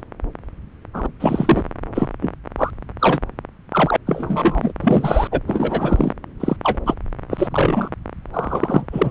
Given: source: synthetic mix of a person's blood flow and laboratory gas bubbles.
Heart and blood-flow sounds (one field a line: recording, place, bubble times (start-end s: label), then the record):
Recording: Doppler ultrasound of blood flow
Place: subclavian vein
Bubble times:
0.94-1.06 s: bubbles
1.20-1.62 s: bubbles
1.94-2.08 s: bubbles
2.21-2.32 s: bubbles
2.58-2.71 s: bubbles
2.99-3.19 s: bubbles
3.73-3.96 s: bubbles
4.07-4.72 s: bubbles
4.81-5.28 s: bubbles
5.32-5.40 s: bubbles
5.47-6.12 s: bubbles
6.40-6.57 s: bubbles
6.63-6.78 s: bubbles
6.86-6.94 s: bubbles
7.30-7.47 s: bubbles
7.51-7.89 s: bubbles
8.33-9.11 s: bubbles
From the record:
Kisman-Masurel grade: 243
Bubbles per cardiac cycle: several, 3 to 8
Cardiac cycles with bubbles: 100%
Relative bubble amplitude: loud (0.450 to 0.775)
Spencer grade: 3 (all of the cardiac periods contain showers or single bubble signals, but not dominating or overriding the cardiac motion signals)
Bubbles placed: anywhere in the cardiac cycle